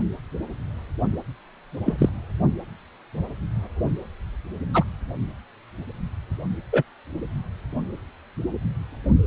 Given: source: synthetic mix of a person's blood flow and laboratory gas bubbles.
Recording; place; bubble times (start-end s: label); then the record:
Doppler ultrasound of blood flow; precordium
1.85-2.09 s: bubbles
4.73-4.84 s: bubbles
6.72-6.82 s: bubbles
From the record:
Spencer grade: 2 (many but less than half of the cardiac periods contain bubble signals, singularly or in groups); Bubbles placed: only in the low amplitude regions of the cardiac cycle